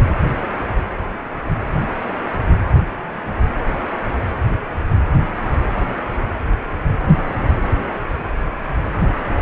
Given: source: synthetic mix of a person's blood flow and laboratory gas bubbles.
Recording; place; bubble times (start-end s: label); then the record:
Doppler ultrasound of blood flow; precordium
9.31-9.42 s: bubbles
From the record:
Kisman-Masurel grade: 111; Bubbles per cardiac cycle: 1 to 2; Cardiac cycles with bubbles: 1 to 10%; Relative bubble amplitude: barely perceptible (0.100 to 0.250); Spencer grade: 1 (occasional bubble signal discernible with the cardiac motion signal, with majority of cardiac periods free of bubbles); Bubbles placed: anywhere in the cardiac cycle